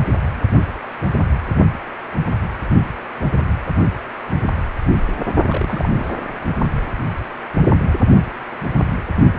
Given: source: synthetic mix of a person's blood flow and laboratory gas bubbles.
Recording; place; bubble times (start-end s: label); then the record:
Doppler ultrasound of blood flow; precordium
5.47-6.10 s: bubbles
From the record:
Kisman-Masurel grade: 211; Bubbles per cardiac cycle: several, 3 to 8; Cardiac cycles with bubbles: 1 to 10%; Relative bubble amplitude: barely perceptible (0.100 to 0.250); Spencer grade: 1 (occasional bubble signal discernible with the cardiac motion signal, with majority of cardiac periods free of bubbles); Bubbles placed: only in the low amplitude regions of the cardiac cycle